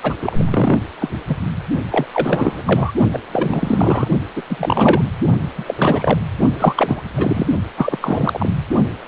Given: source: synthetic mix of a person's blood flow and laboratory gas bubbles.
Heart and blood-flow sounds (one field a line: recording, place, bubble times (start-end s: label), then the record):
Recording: Doppler ultrasound of blood flow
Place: precordium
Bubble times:
0.03-0.14 s: bubbles
0.22-0.80 s: bubbles
1.00-1.09 s: bubbles
1.28-1.35 s: bubbles
1.91-2.06 s: bubbles
2.14-2.92 s: bubbles
3.12-3.19 s: bubbles
3.33-4.08 s: bubbles
4.36-4.42 s: bubbles
4.50-5.02 s: bubbles
5.58-6.19 s: bubbles
6.58-7.02 s: bubbles
7.14-7.46 s: bubbles
7.76-7.98 s: bubbles
8.01-8.52 s: bubbles
From the record:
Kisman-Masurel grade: 343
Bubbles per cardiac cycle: rolling drumbeat, 9 or more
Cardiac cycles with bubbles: 100%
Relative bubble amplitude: loud (0.450 to 0.775)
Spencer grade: 3 (all of the cardiac periods contain showers or single bubble signals, but not dominating or overriding the cardiac motion signals)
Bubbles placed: only in the low amplitude regions of the cardiac cycle